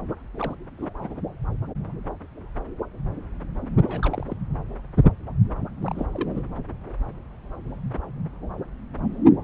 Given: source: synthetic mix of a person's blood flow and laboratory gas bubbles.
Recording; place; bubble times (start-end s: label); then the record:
Doppler ultrasound of blood flow; subclavian vein
0.35-0.54 s: bubbles
0.79-0.90 s: bubbles
1.00-1.21 s: bubbles
3.74-4.37 s: bubbles
5.83-6.07 s: bubbles
6.13-6.41 s: bubbles
From the record:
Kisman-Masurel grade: 221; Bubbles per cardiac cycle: several, 3 to 8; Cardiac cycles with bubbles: 10 to 50%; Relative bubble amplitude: barely perceptible (0.100 to 0.250); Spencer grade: 2 (many but less than half of the cardiac periods contain bubble signals, singularly or in groups); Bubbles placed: anywhere in the cardiac cycle